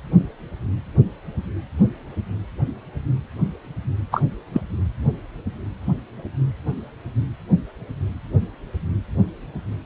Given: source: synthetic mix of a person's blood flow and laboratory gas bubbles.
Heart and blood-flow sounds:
Doppler ultrasound of blood flow; precordium
4.11-4.23 s: bubbles
4.53-4.61 s: bubbles
From the record:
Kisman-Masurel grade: 113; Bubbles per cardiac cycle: 1 to 2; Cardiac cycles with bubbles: 1 to 10%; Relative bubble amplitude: loud (0.450 to 0.775); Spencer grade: 1 (occasional bubble signal discernible with the cardiac motion signal, with majority of cardiac periods free of bubbles); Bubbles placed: anywhere in the cardiac cycle

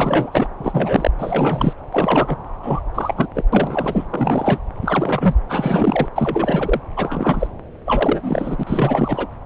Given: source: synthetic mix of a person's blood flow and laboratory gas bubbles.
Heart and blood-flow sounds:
Doppler ultrasound of blood flow; subclavian vein
0.00-0.48 s: bubbles
0.58-1.11 s: bubbles
1.18-1.73 s: bubbles
1.92-2.38 s: bubbles
2.62-2.80 s: bubbles
2.94-3.14 s: bubbles
3.17-3.27 s: bubbles
3.34-3.44 s: bubbles
3.52-4.06 s: bubbles
4.10-4.58 s: bubbles
4.82-5.35 s: bubbles
5.49-6.09 s: bubbles
6.16-6.81 s: bubbles
6.96-7.48 s: bubbles
7.86-8.63 s: bubbles
8.66-9.26 s: bubbles
From the record:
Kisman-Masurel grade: 343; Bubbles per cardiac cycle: rolling drumbeat, 9 or more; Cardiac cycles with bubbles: 100%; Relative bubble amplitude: loud (0.450 to 0.775); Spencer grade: 3 (all of the cardiac periods contain showers or single bubble signals, but not dominating or overriding the cardiac motion signals); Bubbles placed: anywhere in the cardiac cycle

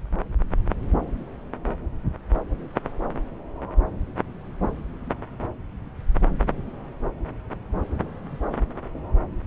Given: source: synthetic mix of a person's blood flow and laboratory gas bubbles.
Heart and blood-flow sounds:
Doppler ultrasound of blood flow; subclavian vein
no bubbles
From the record:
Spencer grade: 0 (complete lack of bubble signals)

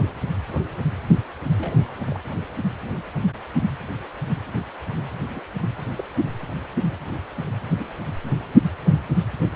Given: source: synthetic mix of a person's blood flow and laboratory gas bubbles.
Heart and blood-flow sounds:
Doppler ultrasound of blood flow; precordium
1.58-1.94 s: bubbles
2.07-2.17 s: bubbles
5.29-5.40 s: bubbles
5.95-6.04 s: bubbles
7.78-7.93 s: bubbles
From the record:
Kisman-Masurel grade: 121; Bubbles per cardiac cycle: 1 to 2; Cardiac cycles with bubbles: 10 to 50%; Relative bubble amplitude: barely perceptible (0.100 to 0.250); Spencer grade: 2 (many but less than half of the cardiac periods contain bubble signals, singularly or in groups); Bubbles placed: only in the low amplitude regions of the cardiac cycle

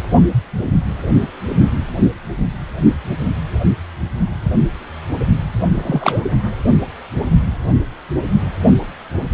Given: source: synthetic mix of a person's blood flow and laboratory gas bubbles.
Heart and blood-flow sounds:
Doppler ultrasound of blood flow; precordium
5.71-6.21 s: bubbles
From the record:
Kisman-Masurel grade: 113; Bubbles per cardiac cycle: 1 to 2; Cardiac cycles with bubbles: 1 to 10%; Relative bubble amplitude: loud (0.450 to 0.775); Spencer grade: 1 (occasional bubble signal discernible with the cardiac motion signal, with majority of cardiac periods free of bubbles); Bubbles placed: only in the low amplitude regions of the cardiac cycle

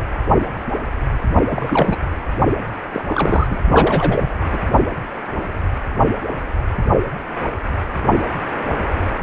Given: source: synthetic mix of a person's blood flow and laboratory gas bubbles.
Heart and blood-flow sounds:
Doppler ultrasound of blood flow; precordium
0.00-0.03 s: bubbles
1.50-1.97 s: bubbles
2.94-3.05 s: bubbles
3.10-3.47 s: bubbles
3.50-3.57 s: bubbles
3.70-4.36 s: bubbles
4.51-4.58 s: bubbles
From the record:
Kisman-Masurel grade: 332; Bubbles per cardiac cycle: rolling drumbeat, 9 or more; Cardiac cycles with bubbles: 50 to 99%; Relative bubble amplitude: moderate (0.250 to 0.450); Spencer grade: 3 (all of the cardiac periods contain showers or single bubble signals, but not dominating or overriding the cardiac motion signals); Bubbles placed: only in the low amplitude regions of the cardiac cycle

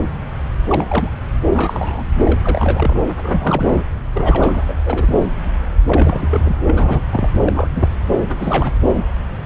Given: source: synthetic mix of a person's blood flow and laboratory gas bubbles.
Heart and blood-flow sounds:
Doppler ultrasound of blood flow; subclavian vein
0.67-1.13 s: bubbles
1.52-2.06 s: bubbles
2.25-3.00 s: bubbles
3.17-3.84 s: bubbles
4.13-4.63 s: bubbles
4.68-4.74 s: bubbles
4.84-5.26 s: bubbles
5.86-6.57 s: bubbles
6.67-7.01 s: bubbles
7.11-7.30 s: bubbles
7.42-7.68 s: bubbles
7.75-7.88 s: bubbles
8.18-8.71 s: bubbles
From the record:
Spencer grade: 3 (all of the cardiac periods contain showers or single bubble signals, but not dominating or overriding the cardiac motion signals); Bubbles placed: anywhere in the cardiac cycle

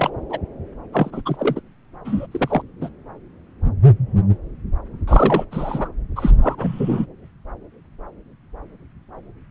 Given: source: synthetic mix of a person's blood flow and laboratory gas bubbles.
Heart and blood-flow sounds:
Doppler ultrasound of blood flow; subclavian vein
0.00-0.10 s: bubbles
0.29-0.38 s: bubbles
0.93-1.22 s: bubbles
1.25-1.36 s: bubbles
1.39-1.61 s: bubbles
2.05-2.26 s: bubbles
2.31-2.62 s: bubbles
2.81-2.89 s: bubbles
5.08-5.45 s: bubbles
5.51-5.88 s: bubbles
6.16-7.06 s: bubbles
From the record:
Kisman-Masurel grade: 222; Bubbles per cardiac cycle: several, 3 to 8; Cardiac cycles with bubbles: 10 to 50%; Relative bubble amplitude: moderate (0.250 to 0.450); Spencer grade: 2 (many but less than half of the cardiac periods contain bubble signals, singularly or in groups); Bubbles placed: anywhere in the cardiac cycle

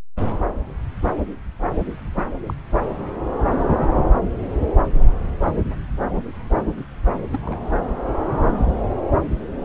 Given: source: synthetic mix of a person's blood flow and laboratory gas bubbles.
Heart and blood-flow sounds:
Doppler ultrasound of blood flow; subclavian vein
2.14-2.23 s: bubbles
2.46-2.54 s: bubbles
7.32-7.38 s: bubbles
7.42-7.80 s: bubbles
From the record:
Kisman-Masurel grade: 111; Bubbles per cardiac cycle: 1 to 2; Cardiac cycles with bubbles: 1 to 10%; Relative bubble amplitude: barely perceptible (0.100 to 0.250); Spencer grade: 1 (occasional bubble signal discernible with the cardiac motion signal, with majority of cardiac periods free of bubbles); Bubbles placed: anywhere in the cardiac cycle

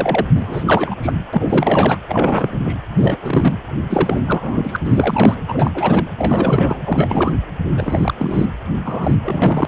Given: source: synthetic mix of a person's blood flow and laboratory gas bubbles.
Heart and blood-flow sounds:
Doppler ultrasound of blood flow; precordium
0.00-0.26 s: bubbles
0.35-0.95 s: bubbles
1.02-1.13 s: bubbles
1.33-1.98 s: bubbles
2.07-2.58 s: bubbles
2.65-2.77 s: bubbles
2.97-3.18 s: bubbles
3.21-3.54 s: bubbles
3.90-4.22 s: bubbles
4.27-4.77 s: bubbles
4.84-5.35 s: bubbles
5.48-5.72 s: bubbles
5.75-6.07 s: bubbles
6.18-6.80 s: bubbles
6.85-7.37 s: bubbles
7.75-8.14 s: bubbles
8.17-8.46 s: bubbles
8.84-9.15 s: bubbles
9.23-9.65 s: bubbles
From the record:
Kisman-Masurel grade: 343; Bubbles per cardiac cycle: rolling drumbeat, 9 or more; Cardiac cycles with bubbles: 100%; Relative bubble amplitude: loud (0.450 to 0.775); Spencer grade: 3 (all of the cardiac periods contain showers or single bubble signals, but not dominating or overriding the cardiac motion signals); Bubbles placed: anywhere in the cardiac cycle

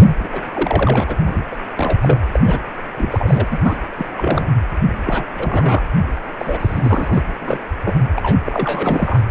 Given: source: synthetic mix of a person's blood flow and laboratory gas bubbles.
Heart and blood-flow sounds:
Doppler ultrasound of blood flow; precordium
0.00-0.03 s: bubbles
0.08-0.16 s: bubbles
0.20-0.28 s: bubbles
0.32-0.42 s: bubbles
0.53-1.17 s: bubbles
1.25-1.43 s: bubbles
1.51-1.57 s: bubbles
1.75-1.98 s: bubbles
2.02-2.19 s: bubbles
2.31-2.40 s: bubbles
2.43-2.60 s: bubbles
2.96-3.48 s: bubbles
3.50-3.59 s: bubbles
3.63-3.77 s: bubbles
3.97-4.07 s: bubbles
4.16-4.45 s: bubbles
5.05-5.26 s: bubbles
5.35-5.83 s: bubbles
6.39-7.22 s: bubbles
7.41-7.58 s: bubbles
7.85-7.94 s: bubbles
8.15-8.40 s: bubbles
8.46-9.20 s: bubbles
From the record:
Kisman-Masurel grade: 342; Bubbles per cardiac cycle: rolling drumbeat, 9 or more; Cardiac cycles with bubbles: 100%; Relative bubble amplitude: moderate (0.250 to 0.450); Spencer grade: 3 (all of the cardiac periods contain showers or single bubble signals, but not dominating or overriding the cardiac motion signals); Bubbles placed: anywhere in the cardiac cycle

